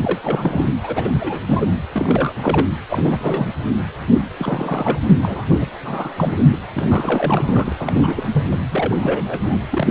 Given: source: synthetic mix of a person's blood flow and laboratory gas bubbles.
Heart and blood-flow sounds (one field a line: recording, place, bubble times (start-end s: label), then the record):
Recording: Doppler ultrasound of blood flow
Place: precordium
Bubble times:
0.00-0.18 s: bubbles
0.22-0.71 s: bubbles
0.82-1.11 s: bubbles
1.19-1.41 s: bubbles
1.45-1.67 s: bubbles
1.89-2.34 s: bubbles
2.40-2.67 s: bubbles
2.89-3.56 s: bubbles
4.39-5.00 s: bubbles
5.22-5.45 s: bubbles
5.50-5.67 s: bubbles
5.83-6.12 s: bubbles
6.16-6.44 s: bubbles
6.52-6.58 s: bubbles
6.73-7.73 s: bubbles
7.79-8.44 s: bubbles
8.48-8.59 s: bubbles
8.70-9.61 s: bubbles
9.71-9.88 s: bubbles
From the record:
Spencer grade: 3 (all of the cardiac periods contain showers or single bubble signals, but not dominating or overriding the cardiac motion signals)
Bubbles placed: anywhere in the cardiac cycle